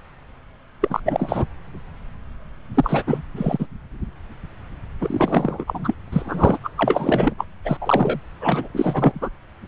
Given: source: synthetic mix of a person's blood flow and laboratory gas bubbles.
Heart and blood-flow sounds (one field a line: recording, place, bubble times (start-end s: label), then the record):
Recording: Doppler ultrasound of blood flow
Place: subclavian vein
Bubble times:
0.81-1.00 s: bubbles
1.05-1.46 s: bubbles
2.74-3.04 s: bubbles
3.06-3.21 s: bubbles
3.36-3.67 s: bubbles
5.01-5.95 s: bubbles
6.12-6.59 s: bubbles
6.64-6.71 s: bubbles
6.77-7.34 s: bubbles
7.38-7.45 s: bubbles
7.65-7.77 s: bubbles
7.81-8.20 s: bubbles
8.40-8.68 s: bubbles
8.74-9.29 s: bubbles
From the record:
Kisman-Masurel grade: 333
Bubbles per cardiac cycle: rolling drumbeat, 9 or more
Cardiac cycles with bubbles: 50 to 99%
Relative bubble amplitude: loud (0.450 to 0.775)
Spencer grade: 3 (all of the cardiac periods contain showers or single bubble signals, but not dominating or overriding the cardiac motion signals)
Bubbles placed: anywhere in the cardiac cycle